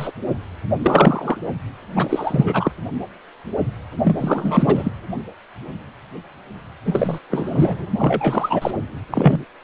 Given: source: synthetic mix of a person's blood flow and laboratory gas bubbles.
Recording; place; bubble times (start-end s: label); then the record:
Doppler ultrasound of blood flow; precordium
0.00-0.12 s: bubbles
0.82-1.37 s: bubbles
1.94-2.71 s: bubbles
4.04-4.92 s: bubbles
6.85-7.18 s: bubbles
7.30-7.86 s: bubbles
7.98-8.71 s: bubbles
9.11-9.45 s: bubbles
From the record:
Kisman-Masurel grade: 333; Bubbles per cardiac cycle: rolling drumbeat, 9 or more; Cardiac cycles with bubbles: 50 to 99%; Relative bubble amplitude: loud (0.450 to 0.775); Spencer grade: 3 (all of the cardiac periods contain showers or single bubble signals, but not dominating or overriding the cardiac motion signals); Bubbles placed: only in the low amplitude regions of the cardiac cycle